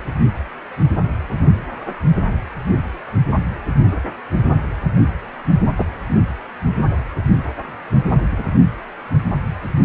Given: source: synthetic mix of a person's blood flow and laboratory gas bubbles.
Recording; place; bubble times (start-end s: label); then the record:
Doppler ultrasound of blood flow; precordium
5.77-5.86 s: bubbles
8.09-8.50 s: bubbles
From the record:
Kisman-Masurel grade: 122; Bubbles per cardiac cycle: 1 to 2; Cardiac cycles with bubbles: 10 to 50%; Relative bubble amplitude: moderate (0.250 to 0.450); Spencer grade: 2 (many but less than half of the cardiac periods contain bubble signals, singularly or in groups); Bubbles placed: only in the low amplitude regions of the cardiac cycle